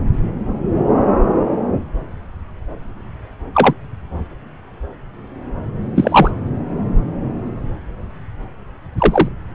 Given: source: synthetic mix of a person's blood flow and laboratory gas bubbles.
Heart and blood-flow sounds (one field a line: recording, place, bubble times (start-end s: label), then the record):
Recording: Doppler ultrasound of blood flow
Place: subclavian vein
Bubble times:
3.54-3.74 s: bubbles
5.95-6.31 s: bubbles
8.98-9.29 s: bubbles
From the record:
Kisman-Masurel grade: 123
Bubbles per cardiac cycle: 1 to 2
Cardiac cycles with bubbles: 10 to 50%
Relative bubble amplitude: loud (0.450 to 0.775)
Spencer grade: 2 (many but less than half of the cardiac periods contain bubble signals, singularly or in groups)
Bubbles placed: anywhere in the cardiac cycle